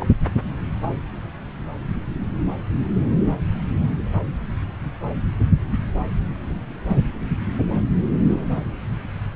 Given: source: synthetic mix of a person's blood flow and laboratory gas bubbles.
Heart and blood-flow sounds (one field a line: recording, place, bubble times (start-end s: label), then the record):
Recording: Doppler ultrasound of blood flow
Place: subclavian vein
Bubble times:
0.00-0.07 s: bubbles
From the record:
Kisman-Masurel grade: 213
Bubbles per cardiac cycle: several, 3 to 8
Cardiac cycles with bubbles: 1 to 10%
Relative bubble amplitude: loud (0.450 to 0.775)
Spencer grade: 1 (occasional bubble signal discernible with the cardiac motion signal, with majority of cardiac periods free of bubbles)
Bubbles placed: anywhere in the cardiac cycle